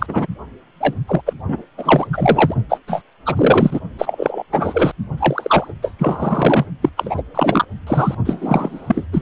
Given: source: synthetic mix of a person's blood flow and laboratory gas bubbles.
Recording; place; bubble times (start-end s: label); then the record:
Doppler ultrasound of blood flow; precordium
0.00-0.27 s: bubbles
0.80-0.94 s: bubbles
1.07-1.21 s: bubbles
1.26-1.33 s: bubbles
1.47-1.62 s: bubbles
1.77-2.07 s: bubbles
2.12-2.54 s: bubbles
2.69-2.79 s: bubbles
2.88-3.02 s: bubbles
3.25-3.79 s: bubbles
3.99-4.43 s: bubbles
4.52-4.92 s: bubbles
5.17-5.72 s: bubbles
5.83-5.92 s: bubbles
5.99-6.66 s: bubbles
6.82-6.89 s: bubbles
6.96-7.23 s: bubbles
7.34-7.65 s: bubbles
7.86-8.15 s: bubbles
8.25-9.05 s: bubbles
9.12-9.22 s: bubbles
From the record:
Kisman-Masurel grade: 343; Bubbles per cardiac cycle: rolling drumbeat, 9 or more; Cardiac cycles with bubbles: 100%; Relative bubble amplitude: loud (0.450 to 0.775); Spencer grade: 3 (all of the cardiac periods contain showers or single bubble signals, but not dominating or overriding the cardiac motion signals); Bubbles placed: only in the low amplitude regions of the cardiac cycle